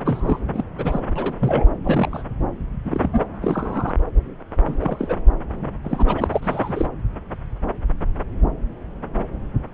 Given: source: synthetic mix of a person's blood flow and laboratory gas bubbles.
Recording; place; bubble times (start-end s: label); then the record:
Doppler ultrasound of blood flow; subclavian vein
0.05-0.39 s: bubbles
0.53-0.64 s: bubbles
0.78-1.00 s: bubbles
1.16-1.34 s: bubbles
1.40-1.66 s: bubbles
1.84-2.24 s: bubbles
2.85-3.24 s: bubbles
3.42-3.94 s: bubbles
4.67-4.75 s: bubbles
4.79-5.14 s: bubbles
5.83-6.04 s: bubbles
6.07-6.87 s: bubbles
From the record:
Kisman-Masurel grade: 232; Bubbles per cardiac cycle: several, 3 to 8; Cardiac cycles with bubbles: 50 to 99%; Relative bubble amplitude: moderate (0.250 to 0.450); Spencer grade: 3 (all of the cardiac periods contain showers or single bubble signals, but not dominating or overriding the cardiac motion signals); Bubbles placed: anywhere in the cardiac cycle